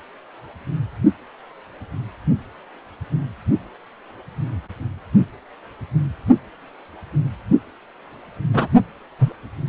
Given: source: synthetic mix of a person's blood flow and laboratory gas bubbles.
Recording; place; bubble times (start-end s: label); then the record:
Doppler ultrasound of blood flow; precordium
8.53-8.68 s: bubbles
9.19-9.33 s: bubbles
From the record:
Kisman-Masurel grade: 113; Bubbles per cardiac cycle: 1 to 2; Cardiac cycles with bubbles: 1 to 10%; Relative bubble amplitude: loud (0.450 to 0.775); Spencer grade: 1 (occasional bubble signal discernible with the cardiac motion signal, with majority of cardiac periods free of bubbles); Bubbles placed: anywhere in the cardiac cycle